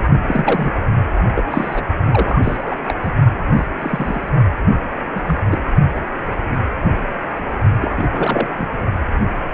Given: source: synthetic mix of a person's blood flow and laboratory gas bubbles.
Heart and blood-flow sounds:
Doppler ultrasound of blood flow; precordium
0.27-0.71 s: bubbles
1.35-1.43 s: bubbles
1.50-1.83 s: bubbles
2.11-2.76 s: bubbles
2.88-2.94 s: bubbles
3.02-3.12 s: bubbles
3.56-3.64 s: bubbles
3.79-4.29 s: bubbles
5.15-5.37 s: bubbles
5.50-5.58 s: bubbles
7.80-8.48 s: bubbles
8.50-8.67 s: bubbles
From the record:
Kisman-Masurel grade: 232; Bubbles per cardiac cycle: several, 3 to 8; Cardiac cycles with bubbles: 50 to 99%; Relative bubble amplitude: moderate (0.250 to 0.450); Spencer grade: 3 (all of the cardiac periods contain showers or single bubble signals, but not dominating or overriding the cardiac motion signals); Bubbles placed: only in the low amplitude regions of the cardiac cycle

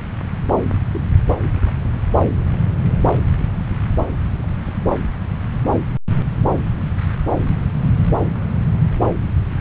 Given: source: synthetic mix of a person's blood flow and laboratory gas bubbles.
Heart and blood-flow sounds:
Doppler ultrasound of blood flow; subclavian vein
0.94-1.03 s: bubbles
1.66-1.71 s: bubbles
From the record:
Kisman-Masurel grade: 111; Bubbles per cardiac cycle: 1 to 2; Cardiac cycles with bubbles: 1 to 10%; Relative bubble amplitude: barely perceptible (0.100 to 0.250); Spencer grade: 1 (occasional bubble signal discernible with the cardiac motion signal, with majority of cardiac periods free of bubbles); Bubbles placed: anywhere in the cardiac cycle

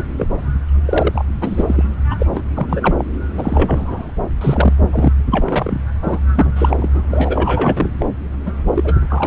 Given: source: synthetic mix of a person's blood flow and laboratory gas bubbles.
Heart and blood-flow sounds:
Doppler ultrasound of blood flow; subclavian vein
0.00-0.02 s: bubbles
0.17-0.27 s: bubbles
0.85-1.25 s: bubbles
1.41-1.98 s: bubbles
2.10-2.15 s: bubbles
2.19-2.26 s: bubbles
2.33-2.42 s: bubbles
2.54-2.94 s: bubbles
2.98-3.04 s: bubbles
3.37-4.11 s: bubbles
4.41-4.73 s: bubbles
4.92-5.12 s: bubbles
5.31-5.84 s: bubbles
6.01-6.20 s: bubbles
6.35-7.01 s: bubbles
7.10-7.90 s: bubbles
7.98-8.06 s: bubbles
8.45-8.52 s: bubbles
8.75-8.94 s: bubbles
9.08-9.27 s: bubbles
From the record:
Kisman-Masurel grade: 343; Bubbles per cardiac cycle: rolling drumbeat, 9 or more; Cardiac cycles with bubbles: 100%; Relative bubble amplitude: loud (0.450 to 0.775); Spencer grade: 3 (all of the cardiac periods contain showers or single bubble signals, but not dominating or overriding the cardiac motion signals); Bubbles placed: anywhere in the cardiac cycle

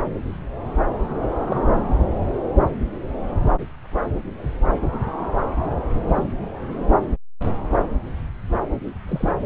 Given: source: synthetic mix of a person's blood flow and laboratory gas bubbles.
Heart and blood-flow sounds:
Doppler ultrasound of blood flow; subclavian vein
1.50-1.60 s: bubbles
6.14-6.24 s: bubbles
9.07-9.30 s: bubbles
From the record:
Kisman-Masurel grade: 121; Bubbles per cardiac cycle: 1 to 2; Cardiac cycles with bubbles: 10 to 50%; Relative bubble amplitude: barely perceptible (0.100 to 0.250); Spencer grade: 2 (many but less than half of the cardiac periods contain bubble signals, singularly or in groups); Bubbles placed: anywhere in the cardiac cycle

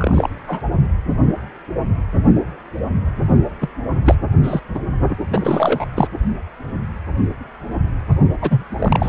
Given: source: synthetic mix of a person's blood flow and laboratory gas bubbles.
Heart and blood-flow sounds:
Doppler ultrasound of blood flow; precordium
0.00-0.29 s: bubbles
0.47-0.62 s: bubbles
3.61-3.68 s: bubbles
4.05-4.15 s: bubbles
4.43-4.61 s: bubbles
4.74-4.79 s: bubbles
5.09-5.16 s: bubbles
5.30-5.86 s: bubbles
5.95-6.07 s: bubbles
8.41-8.65 s: bubbles
8.78-9.09 s: bubbles
From the record:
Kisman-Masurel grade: 232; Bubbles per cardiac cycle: several, 3 to 8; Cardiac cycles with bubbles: 50 to 99%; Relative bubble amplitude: moderate (0.250 to 0.450); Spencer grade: 3 (all of the cardiac periods contain showers or single bubble signals, but not dominating or overriding the cardiac motion signals); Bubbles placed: only in the low amplitude regions of the cardiac cycle

